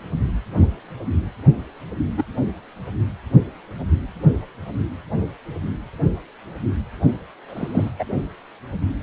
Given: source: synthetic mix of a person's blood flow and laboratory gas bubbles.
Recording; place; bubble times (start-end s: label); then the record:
Doppler ultrasound of blood flow; precordium
2.17-2.24 s: bubbles
7.48-7.92 s: bubbles
7.99-8.04 s: bubbles
From the record:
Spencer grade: 1 (occasional bubble signal discernible with the cardiac motion signal, with majority of cardiac periods free of bubbles); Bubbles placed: only in the low amplitude regions of the cardiac cycle